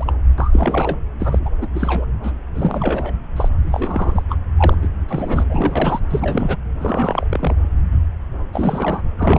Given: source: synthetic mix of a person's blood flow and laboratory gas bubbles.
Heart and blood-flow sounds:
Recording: Doppler ultrasound of blood flow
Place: subclavian vein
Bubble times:
0.00-0.13 s: bubbles
0.38-0.98 s: bubbles
1.19-1.40 s: bubbles
1.45-1.50 s: bubbles
1.61-1.68 s: bubbles
1.74-2.05 s: bubbles
2.22-2.32 s: bubbles
2.54-3.13 s: bubbles
3.36-3.49 s: bubbles
3.63-4.22 s: bubbles
4.29-4.38 s: bubbles
4.57-4.75 s: bubbles
4.81-4.88 s: bubbles
5.08-5.43 s: bubbles
5.48-6.00 s: bubbles
6.10-6.57 s: bubbles
6.79-7.55 s: bubbles
8.53-9.02 s: bubbles
9.17-9.39 s: bubbles
From the record:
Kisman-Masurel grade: 332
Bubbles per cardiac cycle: rolling drumbeat, 9 or more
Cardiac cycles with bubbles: 50 to 99%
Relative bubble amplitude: moderate (0.250 to 0.450)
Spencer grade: 3 (all of the cardiac periods contain showers or single bubble signals, but not dominating or overriding the cardiac motion signals)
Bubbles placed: anywhere in the cardiac cycle

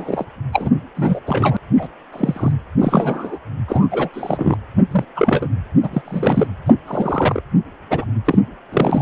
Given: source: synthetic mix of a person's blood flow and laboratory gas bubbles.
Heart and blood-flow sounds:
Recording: Doppler ultrasound of blood flow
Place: precordium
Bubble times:
0.00-0.25 s: bubbles
0.52-0.70 s: bubbles
0.96-1.20 s: bubbles
1.26-1.57 s: bubbles
1.77-1.88 s: bubbles
2.12-2.51 s: bubbles
2.79-3.38 s: bubbles
3.67-3.88 s: bubbles
3.91-4.09 s: bubbles
4.13-4.57 s: bubbles
4.91-5.05 s: bubbles
5.15-5.47 s: bubbles
5.83-5.88 s: bubbles
5.93-6.01 s: bubbles
6.05-6.47 s: bubbles
6.65-6.73 s: bubbles
6.87-7.42 s: bubbles
7.90-8.04 s: bubbles
8.24-8.38 s: bubbles
8.72-9.02 s: bubbles
From the record:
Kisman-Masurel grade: 243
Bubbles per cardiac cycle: several, 3 to 8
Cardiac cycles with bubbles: 100%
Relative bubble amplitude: loud (0.450 to 0.775)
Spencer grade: 3 (all of the cardiac periods contain showers or single bubble signals, but not dominating or overriding the cardiac motion signals)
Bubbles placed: anywhere in the cardiac cycle

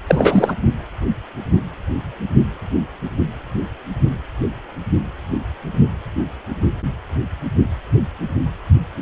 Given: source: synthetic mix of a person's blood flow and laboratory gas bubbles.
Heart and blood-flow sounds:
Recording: Doppler ultrasound of blood flow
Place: precordium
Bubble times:
0.07-0.54 s: bubbles
From the record:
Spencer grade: 1 (occasional bubble signal discernible with the cardiac motion signal, with majority of cardiac periods free of bubbles)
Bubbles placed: only in the low amplitude regions of the cardiac cycle

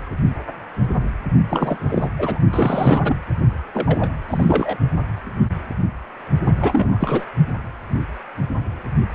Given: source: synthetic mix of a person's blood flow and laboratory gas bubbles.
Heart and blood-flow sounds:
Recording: Doppler ultrasound of blood flow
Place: precordium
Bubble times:
1.50-2.11 s: bubbles
2.18-2.39 s: bubbles
2.50-3.01 s: bubbles
3.04-3.15 s: bubbles
3.74-4.10 s: bubbles
4.28-4.78 s: bubbles
6.46-7.25 s: bubbles
From the record:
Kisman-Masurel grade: 332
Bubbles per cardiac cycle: rolling drumbeat, 9 or more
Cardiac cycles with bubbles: 50 to 99%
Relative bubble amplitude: moderate (0.250 to 0.450)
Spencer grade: 3 (all of the cardiac periods contain showers or single bubble signals, but not dominating or overriding the cardiac motion signals)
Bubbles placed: only in the low amplitude regions of the cardiac cycle

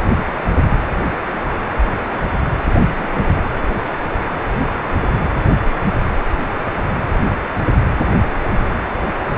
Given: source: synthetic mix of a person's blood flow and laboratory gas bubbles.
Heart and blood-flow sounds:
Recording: Doppler ultrasound of blood flow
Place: precordium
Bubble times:
2.72-2.79 s: bubbles
2.97-3.08 s: bubbles
3.12-3.48 s: bubbles
From the record:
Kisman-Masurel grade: 211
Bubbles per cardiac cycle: several, 3 to 8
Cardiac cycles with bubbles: 1 to 10%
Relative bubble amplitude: barely perceptible (0.100 to 0.250)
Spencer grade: 1 (occasional bubble signal discernible with the cardiac motion signal, with majority of cardiac periods free of bubbles)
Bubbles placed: anywhere in the cardiac cycle

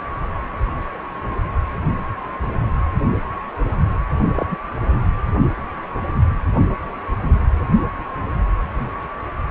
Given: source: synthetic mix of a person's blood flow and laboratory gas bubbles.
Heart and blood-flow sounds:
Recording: Doppler ultrasound of blood flow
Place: precordium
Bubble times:
4.36-4.47 s: bubbles
4.50-4.57 s: bubbles
4.80-5.01 s: bubbles
From the record:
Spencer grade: 2 (many but less than half of the cardiac periods contain bubble signals, singularly or in groups)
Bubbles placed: only in the low amplitude regions of the cardiac cycle

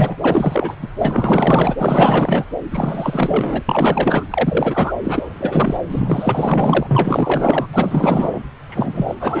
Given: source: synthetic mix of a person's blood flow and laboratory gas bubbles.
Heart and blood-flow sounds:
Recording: Doppler ultrasound of blood flow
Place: subclavian vein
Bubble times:
0.00-0.17 s: bubbles
0.21-0.75 s: bubbles
0.82-0.88 s: bubbles
0.98-2.44 s: bubbles
2.71-3.63 s: bubbles
3.69-4.25 s: bubbles
4.30-4.94 s: bubbles
5.04-5.78 s: bubbles
5.90-7.68 s: bubbles
7.73-8.43 s: bubbles
8.69-9.15 s: bubbles
9.20-9.40 s: bubbles
From the record:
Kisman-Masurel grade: 444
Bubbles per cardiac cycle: continuous sound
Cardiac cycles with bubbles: 100%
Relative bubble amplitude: maximal (0.775 to 0.999)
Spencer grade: 4 (maximum detectable bubble signal sounding continuously throughout systole and diastole of every cardiac period, and overriding the amplitude of the normal cardiac signals)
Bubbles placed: anywhere in the cardiac cycle

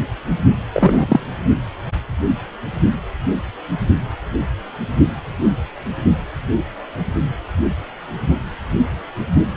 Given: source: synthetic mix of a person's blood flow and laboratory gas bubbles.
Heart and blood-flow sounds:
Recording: Doppler ultrasound of blood flow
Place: precordium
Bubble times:
0.74-1.35 s: bubbles
From the record:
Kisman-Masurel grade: 213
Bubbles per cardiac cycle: several, 3 to 8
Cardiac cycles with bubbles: 1 to 10%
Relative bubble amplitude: loud (0.450 to 0.775)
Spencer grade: 1 (occasional bubble signal discernible with the cardiac motion signal, with majority of cardiac periods free of bubbles)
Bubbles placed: only in the low amplitude regions of the cardiac cycle

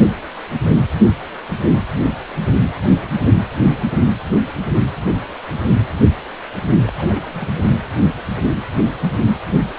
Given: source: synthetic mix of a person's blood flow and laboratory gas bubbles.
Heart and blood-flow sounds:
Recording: Doppler ultrasound of blood flow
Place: precordium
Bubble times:
6.83-6.95 s: bubbles
6.97-7.24 s: bubbles
7.26-7.79 s: bubbles
From the record:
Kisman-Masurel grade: 221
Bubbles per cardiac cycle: several, 3 to 8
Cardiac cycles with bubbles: 10 to 50%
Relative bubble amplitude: barely perceptible (0.100 to 0.250)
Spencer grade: 2 (many but less than half of the cardiac periods contain bubble signals, singularly or in groups)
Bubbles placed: anywhere in the cardiac cycle

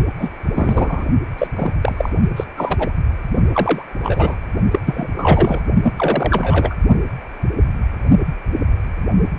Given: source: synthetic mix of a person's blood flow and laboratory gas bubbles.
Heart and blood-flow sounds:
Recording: Doppler ultrasound of blood flow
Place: precordium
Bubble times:
0.18-0.32 s: bubbles
0.42-1.05 s: bubbles
1.38-1.48 s: bubbles
1.55-1.71 s: bubbles
1.81-2.10 s: bubbles
2.36-2.44 s: bubbles
2.56-2.94 s: bubbles
3.52-3.83 s: bubbles
4.03-4.36 s: bubbles
4.71-4.79 s: bubbles
4.86-5.08 s: bubbles
5.17-5.64 s: bubbles
5.83-6.75 s: bubbles
From the record:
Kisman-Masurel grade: 233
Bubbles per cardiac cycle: several, 3 to 8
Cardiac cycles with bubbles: 50 to 99%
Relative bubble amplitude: loud (0.450 to 0.775)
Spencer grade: 3 (all of the cardiac periods contain showers or single bubble signals, but not dominating or overriding the cardiac motion signals)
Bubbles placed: only in the low amplitude regions of the cardiac cycle

